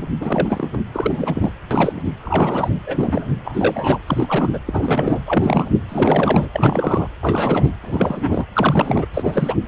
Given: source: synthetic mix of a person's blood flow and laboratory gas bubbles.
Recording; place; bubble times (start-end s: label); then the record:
Doppler ultrasound of blood flow; precordium
0.00-0.08 s: bubbles
0.21-0.69 s: bubbles
0.72-0.78 s: bubbles
0.92-1.51 s: bubbles
1.71-2.02 s: bubbles
2.23-2.81 s: bubbles
2.87-3.25 s: bubbles
3.45-4.00 s: bubbles
4.07-4.58 s: bubbles
4.66-5.20 s: bubbles
5.25-5.70 s: bubbles
5.88-6.48 s: bubbles
6.51-7.08 s: bubbles
7.21-7.72 s: bubbles
7.81-8.45 s: bubbles
8.53-9.06 s: bubbles
9.13-9.55 s: bubbles
From the record:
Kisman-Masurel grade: 343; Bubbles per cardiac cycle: rolling drumbeat, 9 or more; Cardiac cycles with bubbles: 100%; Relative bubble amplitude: loud (0.450 to 0.775); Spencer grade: 3 (all of the cardiac periods contain showers or single bubble signals, but not dominating or overriding the cardiac motion signals); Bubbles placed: anywhere in the cardiac cycle